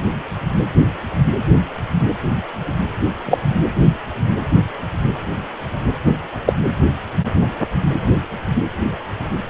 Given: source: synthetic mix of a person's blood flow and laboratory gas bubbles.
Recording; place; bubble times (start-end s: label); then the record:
Doppler ultrasound of blood flow; precordium
3.25-3.38 s: bubbles
6.05-6.12 s: bubbles
6.46-6.53 s: bubbles
From the record:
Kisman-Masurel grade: 123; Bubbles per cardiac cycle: 1 to 2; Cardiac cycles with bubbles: 10 to 50%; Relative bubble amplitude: loud (0.450 to 0.775); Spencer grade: 2 (many but less than half of the cardiac periods contain bubble signals, singularly or in groups); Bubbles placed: anywhere in the cardiac cycle